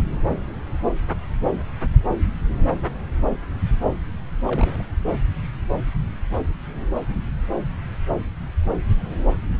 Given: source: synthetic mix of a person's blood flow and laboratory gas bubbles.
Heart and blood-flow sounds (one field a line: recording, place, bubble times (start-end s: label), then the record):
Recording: Doppler ultrasound of blood flow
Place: subclavian vein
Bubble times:
4.48-4.87 s: bubbles
From the record:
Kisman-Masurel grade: 211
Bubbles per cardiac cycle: several, 3 to 8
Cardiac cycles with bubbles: 1 to 10%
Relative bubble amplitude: barely perceptible (0.100 to 0.250)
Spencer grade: 1 (occasional bubble signal discernible with the cardiac motion signal, with majority of cardiac periods free of bubbles)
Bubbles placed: anywhere in the cardiac cycle